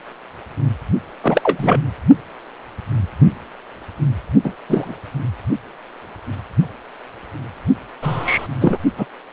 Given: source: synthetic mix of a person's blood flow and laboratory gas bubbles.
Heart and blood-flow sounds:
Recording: Doppler ultrasound of blood flow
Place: precordium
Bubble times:
1.23-1.80 s: bubbles
4.44-4.53 s: bubbles
4.69-4.96 s: bubbles
8.02-8.47 s: bubbles
8.60-8.78 s: bubbles
8.97-9.06 s: bubbles
From the record:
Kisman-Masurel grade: 233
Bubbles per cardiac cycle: several, 3 to 8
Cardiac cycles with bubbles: 50 to 99%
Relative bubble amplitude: loud (0.450 to 0.775)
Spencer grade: 3 (all of the cardiac periods contain showers or single bubble signals, but not dominating or overriding the cardiac motion signals)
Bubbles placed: only in the low amplitude regions of the cardiac cycle

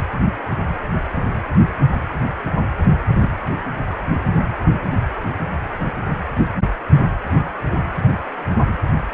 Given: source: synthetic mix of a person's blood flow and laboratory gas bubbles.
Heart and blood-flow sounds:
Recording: Doppler ultrasound of blood flow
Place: precordium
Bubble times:
3.21-3.32 s: bubbles
From the record:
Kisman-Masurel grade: 112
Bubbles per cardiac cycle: 1 to 2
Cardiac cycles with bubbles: 1 to 10%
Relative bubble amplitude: moderate (0.250 to 0.450)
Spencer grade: 1 (occasional bubble signal discernible with the cardiac motion signal, with majority of cardiac periods free of bubbles)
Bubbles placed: only in the low amplitude regions of the cardiac cycle

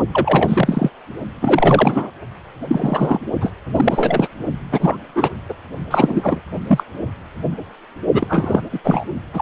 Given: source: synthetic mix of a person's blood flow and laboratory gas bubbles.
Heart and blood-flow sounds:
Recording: Doppler ultrasound of blood flow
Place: precordium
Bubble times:
0.12-0.90 s: bubbles
1.42-2.10 s: bubbles
2.69-3.21 s: bubbles
3.40-3.52 s: bubbles
3.74-4.28 s: bubbles
4.71-4.96 s: bubbles
5.16-5.29 s: bubbles
5.49-5.54 s: bubbles
5.91-6.39 s: bubbles
6.67-6.83 s: bubbles
8.12-8.61 s: bubbles
8.72-8.79 s: bubbles
8.84-9.04 s: bubbles
9.34-9.42 s: bubbles
From the record:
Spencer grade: 3 (all of the cardiac periods contain showers or single bubble signals, but not dominating or overriding the cardiac motion signals)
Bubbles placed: only in the low amplitude regions of the cardiac cycle

